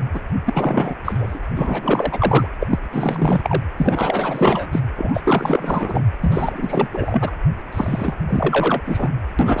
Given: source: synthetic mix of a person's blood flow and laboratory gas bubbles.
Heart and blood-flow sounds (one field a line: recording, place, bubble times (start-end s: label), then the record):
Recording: Doppler ultrasound of blood flow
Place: precordium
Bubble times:
0.12-0.20 s: bubbles
0.45-0.94 s: bubbles
1.04-1.39 s: bubbles
1.55-2.48 s: bubbles
2.60-2.67 s: bubbles
2.70-2.79 s: bubbles
2.91-3.62 s: bubbles
3.77-4.79 s: bubbles
4.96-6.04 s: bubbles
6.21-6.88 s: bubbles
6.92-7.31 s: bubbles
7.71-8.15 s: bubbles
8.29-8.81 s: bubbles
8.85-9.13 s: bubbles
9.39-9.60 s: bubbles
From the record:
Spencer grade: 4 (maximum detectable bubble signal sounding continuously throughout systole and diastole of every cardiac period, and overriding the amplitude of the normal cardiac signals)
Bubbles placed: anywhere in the cardiac cycle